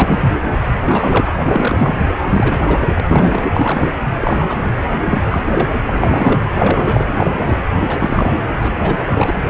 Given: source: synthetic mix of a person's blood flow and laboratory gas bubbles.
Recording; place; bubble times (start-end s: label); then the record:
Doppler ultrasound of blood flow; precordium
0.00-0.35 s: bubbles
0.85-1.36 s: bubbles
1.46-1.98 s: bubbles
2.25-2.88 s: bubbles
2.96-3.50 s: bubbles
3.54-3.91 s: bubbles
4.21-4.83 s: bubbles
5.05-5.71 s: bubbles
5.86-6.54 s: bubbles
6.56-7.12 s: bubbles
7.17-7.59 s: bubbles
7.76-8.37 s: bubbles
8.59-9.35 s: bubbles
From the record:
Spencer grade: 3 (all of the cardiac periods contain showers or single bubble signals, but not dominating or overriding the cardiac motion signals); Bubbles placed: anywhere in the cardiac cycle